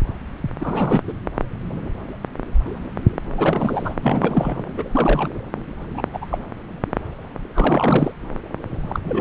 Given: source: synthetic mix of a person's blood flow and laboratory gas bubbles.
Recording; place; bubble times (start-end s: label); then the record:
Doppler ultrasound of blood flow; subclavian vein
0.60-1.01 s: bubbles
1.07-1.12 s: bubbles
3.37-3.94 s: bubbles
4.03-4.74 s: bubbles
4.78-4.83 s: bubbles
4.91-5.28 s: bubbles
5.97-6.02 s: bubbles
6.12-6.26 s: bubbles
6.31-6.38 s: bubbles
7.54-8.12 s: bubbles
8.88-8.99 s: bubbles
9.04-9.21 s: bubbles
From the record:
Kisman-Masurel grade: 222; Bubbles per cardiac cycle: several, 3 to 8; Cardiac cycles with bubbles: 10 to 50%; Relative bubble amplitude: moderate (0.250 to 0.450); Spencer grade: 2 (many but less than half of the cardiac periods contain bubble signals, singularly or in groups); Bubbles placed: anywhere in the cardiac cycle